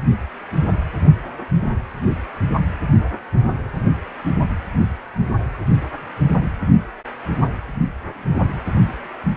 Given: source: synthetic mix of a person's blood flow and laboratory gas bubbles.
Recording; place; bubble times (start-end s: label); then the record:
Doppler ultrasound of blood flow; precordium
no bubbles
From the record:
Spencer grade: 0 (complete lack of bubble signals)